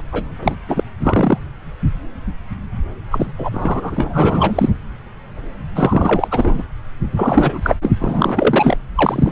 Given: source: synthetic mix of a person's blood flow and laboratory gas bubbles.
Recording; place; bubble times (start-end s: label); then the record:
Doppler ultrasound of blood flow; subclavian vein
0.12-0.25 s: bubbles
0.41-0.55 s: bubbles
0.68-0.83 s: bubbles
0.98-1.38 s: bubbles
3.11-3.31 s: bubbles
3.38-4.70 s: bubbles
5.75-6.28 s: bubbles
6.31-6.63 s: bubbles
7.16-7.76 s: bubbles
7.82-7.91 s: bubbles
7.99-8.78 s: bubbles
8.95-9.32 s: bubbles
From the record:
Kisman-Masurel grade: 333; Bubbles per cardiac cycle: rolling drumbeat, 9 or more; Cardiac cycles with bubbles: 50 to 99%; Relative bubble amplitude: loud (0.450 to 0.775); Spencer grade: 3 (all of the cardiac periods contain showers or single bubble signals, but not dominating or overriding the cardiac motion signals); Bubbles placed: anywhere in the cardiac cycle